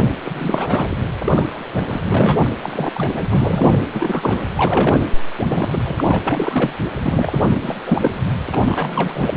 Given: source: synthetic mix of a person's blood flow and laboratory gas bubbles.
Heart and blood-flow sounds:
Doppler ultrasound of blood flow; precordium
0.00-0.10 s: bubbles
0.24-0.96 s: bubbles
1.19-1.66 s: bubbles
1.75-1.98 s: bubbles
2.08-2.49 s: bubbles
2.63-3.25 s: bubbles
3.29-3.82 s: bubbles
3.92-4.44 s: bubbles
4.55-5.00 s: bubbles
5.39-5.79 s: bubbles
5.85-6.72 s: bubbles
7.02-7.46 s: bubbles
7.62-7.76 s: bubbles
7.86-8.11 s: bubbles
8.51-9.30 s: bubbles
9.35-9.37 s: bubbles
From the record:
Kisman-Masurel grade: 342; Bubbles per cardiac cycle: rolling drumbeat, 9 or more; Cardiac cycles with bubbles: 100%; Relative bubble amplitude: moderate (0.250 to 0.450); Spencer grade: 3 (all of the cardiac periods contain showers or single bubble signals, but not dominating or overriding the cardiac motion signals); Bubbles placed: anywhere in the cardiac cycle

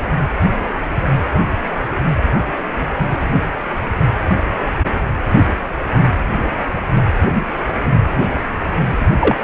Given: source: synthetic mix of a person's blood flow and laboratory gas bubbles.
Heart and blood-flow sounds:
Doppler ultrasound of blood flow; precordium
9.20-9.36 s: bubbles
From the record:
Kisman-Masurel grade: 113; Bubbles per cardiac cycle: 1 to 2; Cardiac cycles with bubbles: 1 to 10%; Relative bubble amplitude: loud (0.450 to 0.775); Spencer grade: 1 (occasional bubble signal discernible with the cardiac motion signal, with majority of cardiac periods free of bubbles); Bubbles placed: anywhere in the cardiac cycle

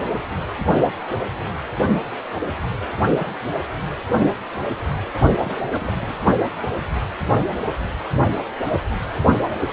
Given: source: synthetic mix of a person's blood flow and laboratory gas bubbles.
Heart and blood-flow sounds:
Doppler ultrasound of blood flow; precordium
5.32-5.62 s: bubbles
5.68-5.92 s: bubbles
5.99-6.20 s: bubbles
From the record:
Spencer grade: 2 (many but less than half of the cardiac periods contain bubble signals, singularly or in groups); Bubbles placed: only in the low amplitude regions of the cardiac cycle

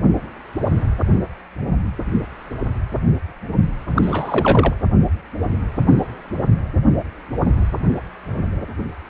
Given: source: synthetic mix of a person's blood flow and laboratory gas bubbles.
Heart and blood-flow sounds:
Doppler ultrasound of blood flow; precordium
3.95-4.73 s: bubbles
From the record:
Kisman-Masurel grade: 212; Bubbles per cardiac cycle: several, 3 to 8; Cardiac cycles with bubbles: 1 to 10%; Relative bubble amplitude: moderate (0.250 to 0.450); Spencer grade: 1 (occasional bubble signal discernible with the cardiac motion signal, with majority of cardiac periods free of bubbles); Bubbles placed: anywhere in the cardiac cycle

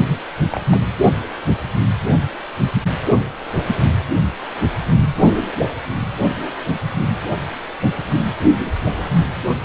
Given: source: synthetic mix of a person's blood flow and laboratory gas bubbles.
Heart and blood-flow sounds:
Doppler ultrasound of blood flow; precordium
0.52-0.60 s: bubbles
0.71-0.80 s: bubbles
From the record:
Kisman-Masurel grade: 212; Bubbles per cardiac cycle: several, 3 to 8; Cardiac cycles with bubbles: 1 to 10%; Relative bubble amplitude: moderate (0.250 to 0.450); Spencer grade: 1 (occasional bubble signal discernible with the cardiac motion signal, with majority of cardiac periods free of bubbles); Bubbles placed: anywhere in the cardiac cycle

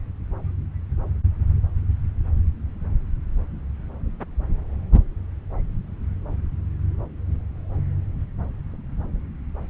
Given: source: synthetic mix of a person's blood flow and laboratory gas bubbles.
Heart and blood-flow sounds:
Doppler ultrasound of blood flow; subclavian vein
no bubbles
From the record:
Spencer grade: 0 (complete lack of bubble signals)

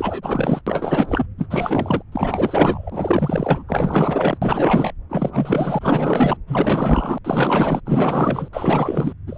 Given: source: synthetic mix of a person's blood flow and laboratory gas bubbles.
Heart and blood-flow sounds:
Doppler ultrasound of blood flow; subclavian vein
0.00-0.61 s: bubbles
0.66-1.26 s: bubbles
1.38-1.47 s: bubbles
1.50-2.02 s: bubbles
2.12-3.64 s: bubbles
3.67-4.38 s: bubbles
4.42-4.92 s: bubbles
5.09-6.37 s: bubbles
6.47-7.18 s: bubbles
7.24-7.80 s: bubbles
7.86-8.48 s: bubbles
8.53-9.13 s: bubbles
9.26-9.38 s: bubbles
From the record:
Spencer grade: 4 (maximum detectable bubble signal sounding continuously throughout systole and diastole of every cardiac period, and overriding the amplitude of the normal cardiac signals); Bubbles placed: anywhere in the cardiac cycle

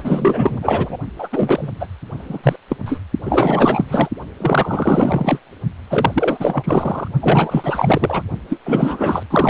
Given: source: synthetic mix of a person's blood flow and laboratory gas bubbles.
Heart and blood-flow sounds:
Doppler ultrasound of blood flow; precordium
0.00-0.58 s: bubbles
0.61-0.98 s: bubbles
1.18-1.29 s: bubbles
1.32-1.69 s: bubbles
1.79-1.88 s: bubbles
2.15-2.56 s: bubbles
2.68-2.77 s: bubbles
2.85-3.01 s: bubbles
3.25-4.08 s: bubbles
4.40-5.39 s: bubbles
5.87-7.08 s: bubbles
7.21-8.22 s: bubbles
8.48-8.59 s: bubbles
8.65-9.23 s: bubbles
9.30-9.50 s: bubbles
From the record:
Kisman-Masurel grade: 444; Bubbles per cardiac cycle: continuous sound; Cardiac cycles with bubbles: 100%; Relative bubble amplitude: maximal (0.775 to 0.999); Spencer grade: 4 (maximum detectable bubble signal sounding continuously throughout systole and diastole of every cardiac period, and overriding the amplitude of the normal cardiac signals); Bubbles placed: only in the low amplitude regions of the cardiac cycle

